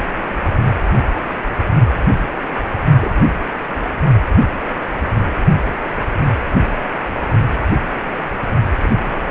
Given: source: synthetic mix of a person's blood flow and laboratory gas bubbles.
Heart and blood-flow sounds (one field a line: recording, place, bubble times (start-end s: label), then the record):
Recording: Doppler ultrasound of blood flow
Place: precordium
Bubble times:
3.00-3.11 s: bubbles
3.17-3.22 s: bubbles
8.76-8.96 s: bubbles
9.04-9.31 s: bubbles
From the record:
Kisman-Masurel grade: 121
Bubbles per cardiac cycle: 1 to 2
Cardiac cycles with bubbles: 10 to 50%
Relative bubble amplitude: barely perceptible (0.100 to 0.250)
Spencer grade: 2 (many but less than half of the cardiac periods contain bubble signals, singularly or in groups)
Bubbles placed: only in the low amplitude regions of the cardiac cycle